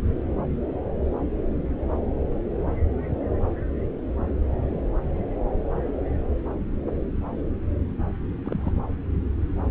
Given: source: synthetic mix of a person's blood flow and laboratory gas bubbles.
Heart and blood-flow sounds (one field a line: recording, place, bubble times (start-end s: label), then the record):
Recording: Doppler ultrasound of blood flow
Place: subclavian vein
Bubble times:
8.44-8.72 s: bubbles
From the record:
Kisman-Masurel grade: 111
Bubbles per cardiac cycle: 1 to 2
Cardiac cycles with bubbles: 1 to 10%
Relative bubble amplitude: barely perceptible (0.100 to 0.250)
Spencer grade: 1 (occasional bubble signal discernible with the cardiac motion signal, with majority of cardiac periods free of bubbles)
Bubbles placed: anywhere in the cardiac cycle